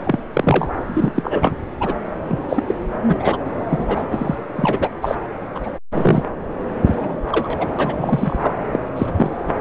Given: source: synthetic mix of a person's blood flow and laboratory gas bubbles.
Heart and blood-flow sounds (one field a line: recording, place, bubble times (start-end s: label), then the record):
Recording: Doppler ultrasound of blood flow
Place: subclavian vein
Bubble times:
0.03-0.23 s: bubbles
0.33-0.71 s: bubbles
0.87-1.57 s: bubbles
1.81-1.94 s: bubbles
2.29-2.38 s: bubbles
2.49-2.64 s: bubbles
2.68-2.75 s: bubbles
3.08-3.38 s: bubbles
3.71-4.05 s: bubbles
4.12-4.36 s: bubbles
4.55-4.89 s: bubbles
5.02-5.16 s: bubbles
5.55-5.61 s: bubbles
5.63-5.70 s: bubbles
5.91-6.23 s: bubbles
6.85-7.20 s: bubbles
7.31-7.67 s: bubbles
7.79-8.53 s: bubbles
8.72-8.79 s: bubbles
8.96-9.07 s: bubbles
9.15-9.30 s: bubbles
9.59-9.61 s: bubbles
From the record:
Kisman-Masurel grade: 242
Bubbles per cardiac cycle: several, 3 to 8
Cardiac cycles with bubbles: 100%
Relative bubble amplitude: moderate (0.250 to 0.450)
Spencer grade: 3 (all of the cardiac periods contain showers or single bubble signals, but not dominating or overriding the cardiac motion signals)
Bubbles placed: anywhere in the cardiac cycle